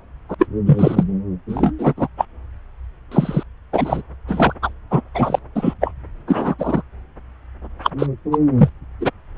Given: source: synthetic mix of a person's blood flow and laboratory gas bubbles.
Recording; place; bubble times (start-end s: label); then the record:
Doppler ultrasound of blood flow; subclavian vein
0.29-0.34 s: bubbles
0.39-0.46 s: bubbles
0.66-1.04 s: bubbles
1.48-1.72 s: bubbles
1.78-1.93 s: bubbles
1.97-2.08 s: bubbles
2.17-2.25 s: bubbles
3.12-3.43 s: bubbles
3.73-4.01 s: bubbles
4.28-4.54 s: bubbles
4.62-4.70 s: bubbles
4.91-5.01 s: bubbles
5.15-5.39 s: bubbles
5.55-5.75 s: bubbles
5.81-5.92 s: bubbles
6.27-6.55 s: bubbles
6.58-6.83 s: bubbles
7.83-7.91 s: bubbles
7.99-8.06 s: bubbles
8.31-8.38 s: bubbles
8.57-8.69 s: bubbles
9.00-9.10 s: bubbles
From the record:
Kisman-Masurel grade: 243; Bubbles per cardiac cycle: several, 3 to 8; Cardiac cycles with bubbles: 100%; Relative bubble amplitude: loud (0.450 to 0.775); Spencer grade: 3 (all of the cardiac periods contain showers or single bubble signals, but not dominating or overriding the cardiac motion signals); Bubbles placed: anywhere in the cardiac cycle